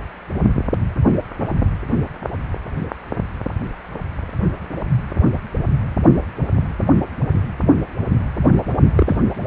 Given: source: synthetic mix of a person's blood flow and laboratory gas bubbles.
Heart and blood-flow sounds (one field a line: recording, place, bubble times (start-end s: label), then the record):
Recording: Doppler ultrasound of blood flow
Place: precordium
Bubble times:
8.96-9.18 s: bubbles
From the record:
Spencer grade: 2 (many but less than half of the cardiac periods contain bubble signals, singularly or in groups)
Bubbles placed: only in the low amplitude regions of the cardiac cycle